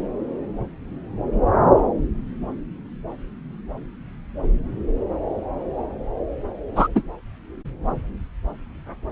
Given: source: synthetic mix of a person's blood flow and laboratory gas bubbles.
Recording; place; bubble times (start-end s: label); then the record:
Doppler ultrasound of blood flow; subclavian vein
6.75-6.88 s: bubbles
6.95-7.03 s: bubbles
From the record:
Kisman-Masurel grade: 123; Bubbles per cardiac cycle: 1 to 2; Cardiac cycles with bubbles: 10 to 50%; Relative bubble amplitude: loud (0.450 to 0.775); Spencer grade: 2 (many but less than half of the cardiac periods contain bubble signals, singularly or in groups); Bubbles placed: anywhere in the cardiac cycle